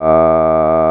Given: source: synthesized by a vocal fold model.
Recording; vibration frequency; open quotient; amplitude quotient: sustained vowel; 80 Hz; 0.2; 1.1